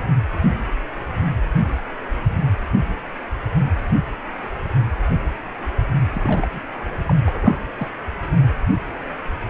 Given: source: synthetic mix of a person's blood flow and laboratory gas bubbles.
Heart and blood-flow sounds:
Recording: Doppler ultrasound of blood flow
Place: precordium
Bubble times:
6.13-6.48 s: bubbles
6.51-6.61 s: bubbles
7.07-7.15 s: bubbles
7.26-7.57 s: bubbles
7.79-7.87 s: bubbles
From the record:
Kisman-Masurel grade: 221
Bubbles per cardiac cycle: several, 3 to 8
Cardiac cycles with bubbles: 10 to 50%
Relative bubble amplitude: barely perceptible (0.100 to 0.250)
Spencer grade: 2 (many but less than half of the cardiac periods contain bubble signals, singularly or in groups)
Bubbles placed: anywhere in the cardiac cycle

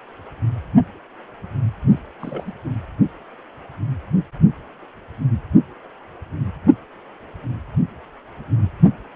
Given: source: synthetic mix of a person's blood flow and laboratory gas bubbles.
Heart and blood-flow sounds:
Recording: Doppler ultrasound of blood flow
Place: precordium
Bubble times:
1.91-2.00 s: bubbles
2.20-2.52 s: bubbles
From the record:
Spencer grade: 1 (occasional bubble signal discernible with the cardiac motion signal, with majority of cardiac periods free of bubbles)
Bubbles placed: only in the low amplitude regions of the cardiac cycle

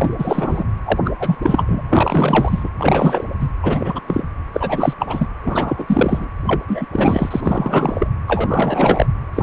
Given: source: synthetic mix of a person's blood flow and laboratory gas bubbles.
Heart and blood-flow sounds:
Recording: Doppler ultrasound of blood flow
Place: precordium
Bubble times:
0.00-0.15 s: bubbles
0.18-0.64 s: bubbles
0.85-0.99 s: bubbles
1.04-1.11 s: bubbles
1.19-1.35 s: bubbles
1.42-2.70 s: bubbles
2.78-3.25 s: bubbles
3.39-3.50 s: bubbles
3.62-4.01 s: bubbles
4.07-4.23 s: bubbles
4.53-4.94 s: bubbles
5.00-5.28 s: bubbles
5.42-6.28 s: bubbles
6.46-6.63 s: bubbles
6.68-6.86 s: bubbles
6.93-8.08 s: bubbles
8.27-9.07 s: bubbles
9.33-9.43 s: bubbles
From the record:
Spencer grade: 3 (all of the cardiac periods contain showers or single bubble signals, but not dominating or overriding the cardiac motion signals)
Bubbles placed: anywhere in the cardiac cycle

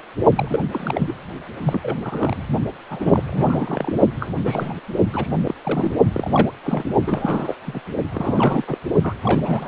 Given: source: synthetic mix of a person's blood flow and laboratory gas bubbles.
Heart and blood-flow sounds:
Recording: Doppler ultrasound of blood flow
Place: precordium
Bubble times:
0.35-0.59 s: bubbles
0.71-1.14 s: bubbles
1.62-1.97 s: bubbles
2.03-2.47 s: bubbles
2.91-3.23 s: bubbles
3.27-3.94 s: bubbles
4.20-4.31 s: bubbles
4.36-4.75 s: bubbles
5.13-5.29 s: bubbles
5.37-5.54 s: bubbles
5.63-5.91 s: bubbles
6.12-6.51 s: bubbles
6.64-6.91 s: bubbles
7.07-7.55 s: bubbles
7.66-7.80 s: bubbles
8.12-8.64 s: bubbles
8.67-8.78 s: bubbles
9.02-9.14 s: bubbles
9.23-9.68 s: bubbles
From the record:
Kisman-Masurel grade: 332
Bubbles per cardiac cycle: rolling drumbeat, 9 or more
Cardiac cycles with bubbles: 50 to 99%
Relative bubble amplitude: moderate (0.250 to 0.450)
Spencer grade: 3 (all of the cardiac periods contain showers or single bubble signals, but not dominating or overriding the cardiac motion signals)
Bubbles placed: only in the low amplitude regions of the cardiac cycle

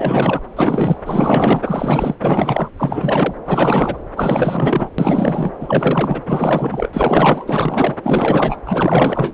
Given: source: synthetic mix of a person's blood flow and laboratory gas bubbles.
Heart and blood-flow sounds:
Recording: Doppler ultrasound of blood flow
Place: subclavian vein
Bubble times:
0.00-0.41 s: bubbles
0.56-0.99 s: bubbles
1.05-1.61 s: bubbles
1.64-2.14 s: bubbles
2.21-2.69 s: bubbles
2.77-3.34 s: bubbles
3.45-3.98 s: bubbles
4.16-4.90 s: bubbles
4.98-5.51 s: bubbles
5.61-6.21 s: bubbles
6.27-6.88 s: bubbles
6.93-7.97 s: bubbles
8.03-8.56 s: bubbles
8.66-9.33 s: bubbles
From the record:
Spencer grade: 4 (maximum detectable bubble signal sounding continuously throughout systole and diastole of every cardiac period, and overriding the amplitude of the normal cardiac signals)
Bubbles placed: anywhere in the cardiac cycle

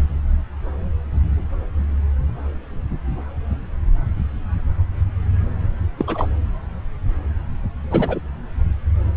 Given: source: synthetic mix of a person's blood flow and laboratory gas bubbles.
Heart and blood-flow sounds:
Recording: Doppler ultrasound of blood flow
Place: subclavian vein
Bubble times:
5.98-6.29 s: bubbles
7.91-8.19 s: bubbles
From the record:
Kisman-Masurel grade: 222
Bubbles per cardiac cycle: several, 3 to 8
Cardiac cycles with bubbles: 10 to 50%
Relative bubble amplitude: moderate (0.250 to 0.450)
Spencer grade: 2 (many but less than half of the cardiac periods contain bubble signals, singularly or in groups)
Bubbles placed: anywhere in the cardiac cycle

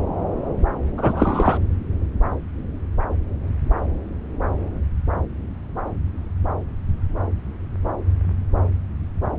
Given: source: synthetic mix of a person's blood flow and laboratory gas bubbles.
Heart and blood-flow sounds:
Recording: Doppler ultrasound of blood flow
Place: subclavian vein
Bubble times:
0.98-1.57 s: bubbles
From the record:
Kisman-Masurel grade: 223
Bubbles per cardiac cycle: several, 3 to 8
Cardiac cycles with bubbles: 10 to 50%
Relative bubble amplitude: loud (0.450 to 0.775)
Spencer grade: 2 (many but less than half of the cardiac periods contain bubble signals, singularly or in groups)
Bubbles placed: anywhere in the cardiac cycle

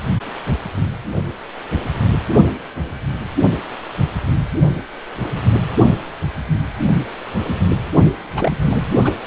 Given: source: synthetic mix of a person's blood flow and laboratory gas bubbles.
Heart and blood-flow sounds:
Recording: Doppler ultrasound of blood flow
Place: precordium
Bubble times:
8.36-8.52 s: bubbles
8.62-8.88 s: bubbles
9.02-9.13 s: bubbles
From the record:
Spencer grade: 1 (occasional bubble signal discernible with the cardiac motion signal, with majority of cardiac periods free of bubbles)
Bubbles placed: only in the low amplitude regions of the cardiac cycle

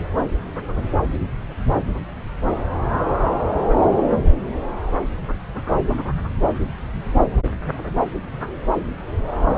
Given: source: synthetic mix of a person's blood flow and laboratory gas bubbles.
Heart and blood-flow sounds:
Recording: Doppler ultrasound of blood flow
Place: subclavian vein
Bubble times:
no bubbles
From the record:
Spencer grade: 0 (complete lack of bubble signals)

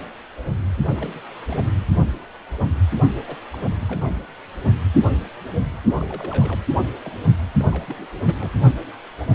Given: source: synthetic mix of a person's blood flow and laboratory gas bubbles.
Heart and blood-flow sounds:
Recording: Doppler ultrasound of blood flow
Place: precordium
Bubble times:
0.90-1.19 s: bubbles
1.47-1.66 s: bubbles
3.27-3.35 s: bubbles
3.52-3.56 s: bubbles
3.80-4.12 s: bubbles
5.98-6.60 s: bubbles
7.02-7.12 s: bubbles
7.58-8.06 s: bubbles
8.26-8.35 s: bubbles
8.40-8.50 s: bubbles
From the record:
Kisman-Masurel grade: 221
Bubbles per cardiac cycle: several, 3 to 8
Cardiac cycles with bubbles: 10 to 50%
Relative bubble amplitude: barely perceptible (0.100 to 0.250)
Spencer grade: 2 (many but less than half of the cardiac periods contain bubble signals, singularly or in groups)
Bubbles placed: only in the low amplitude regions of the cardiac cycle

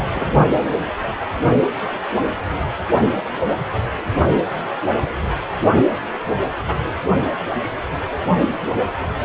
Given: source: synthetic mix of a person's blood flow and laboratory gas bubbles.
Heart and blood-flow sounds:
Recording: Doppler ultrasound of blood flow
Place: precordium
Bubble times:
0.14-0.25 s: bubbles
From the record:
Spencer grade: 1 (occasional bubble signal discernible with the cardiac motion signal, with majority of cardiac periods free of bubbles)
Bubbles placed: only in the low amplitude regions of the cardiac cycle

